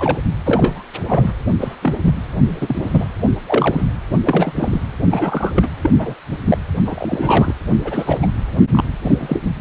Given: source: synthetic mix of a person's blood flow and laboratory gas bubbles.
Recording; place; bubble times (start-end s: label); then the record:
Doppler ultrasound of blood flow; precordium
0.00-0.18 s: bubbles
0.45-0.83 s: bubbles
1.07-1.31 s: bubbles
1.60-1.76 s: bubbles
1.82-1.95 s: bubbles
2.04-2.13 s: bubbles
2.47-3.05 s: bubbles
3.46-3.87 s: bubbles
4.24-4.53 s: bubbles
4.56-4.81 s: bubbles
5.10-5.69 s: bubbles
5.82-5.91 s: bubbles
5.99-6.14 s: bubbles
6.46-6.58 s: bubbles
6.84-7.53 s: bubbles
7.84-8.19 s: bubbles
8.22-8.27 s: bubbles
8.72-8.84 s: bubbles
9.03-9.38 s: bubbles
From the record:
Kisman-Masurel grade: 242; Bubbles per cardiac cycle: several, 3 to 8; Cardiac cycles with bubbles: 100%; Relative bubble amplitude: moderate (0.250 to 0.450); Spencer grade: 3 (all of the cardiac periods contain showers or single bubble signals, but not dominating or overriding the cardiac motion signals); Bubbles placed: anywhere in the cardiac cycle